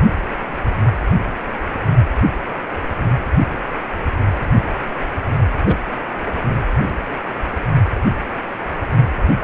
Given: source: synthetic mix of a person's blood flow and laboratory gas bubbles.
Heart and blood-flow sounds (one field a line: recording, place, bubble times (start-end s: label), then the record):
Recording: Doppler ultrasound of blood flow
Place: precordium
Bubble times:
5.65-5.76 s: bubbles
From the record:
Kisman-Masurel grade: 123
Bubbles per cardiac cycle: 1 to 2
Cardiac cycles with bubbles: 10 to 50%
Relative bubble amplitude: loud (0.450 to 0.775)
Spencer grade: 2 (many but less than half of the cardiac periods contain bubble signals, singularly or in groups)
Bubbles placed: anywhere in the cardiac cycle